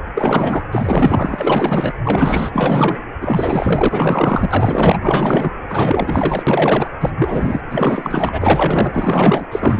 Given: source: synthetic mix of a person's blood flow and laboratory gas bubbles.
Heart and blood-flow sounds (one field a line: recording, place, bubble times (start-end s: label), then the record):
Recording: Doppler ultrasound of blood flow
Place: precordium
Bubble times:
0.14-0.64 s: bubbles
0.71-1.93 s: bubbles
2.04-2.98 s: bubbles
3.21-4.99 s: bubbles
5.01-5.51 s: bubbles
5.70-6.89 s: bubbles
7.00-7.11 s: bubbles
7.17-7.61 s: bubbles
7.70-9.47 s: bubbles
9.51-9.80 s: bubbles
From the record:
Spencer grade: 4 (maximum detectable bubble signal sounding continuously throughout systole and diastole of every cardiac period, and overriding the amplitude of the normal cardiac signals)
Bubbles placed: anywhere in the cardiac cycle